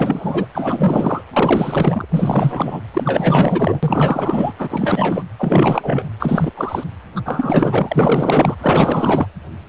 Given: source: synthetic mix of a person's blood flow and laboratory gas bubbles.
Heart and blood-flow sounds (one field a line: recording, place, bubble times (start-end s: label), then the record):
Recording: Doppler ultrasound of blood flow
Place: precordium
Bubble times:
0.00-0.46 s: bubbles
0.54-1.24 s: bubbles
1.32-2.05 s: bubbles
2.09-2.81 s: bubbles
2.93-4.53 s: bubbles
4.58-5.24 s: bubbles
5.39-6.08 s: bubbles
6.19-6.52 s: bubbles
6.57-6.84 s: bubbles
7.16-7.21 s: bubbles
7.25-8.56 s: bubbles
8.61-9.27 s: bubbles
From the record:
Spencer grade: 4 (maximum detectable bubble signal sounding continuously throughout systole and diastole of every cardiac period, and overriding the amplitude of the normal cardiac signals)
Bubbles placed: anywhere in the cardiac cycle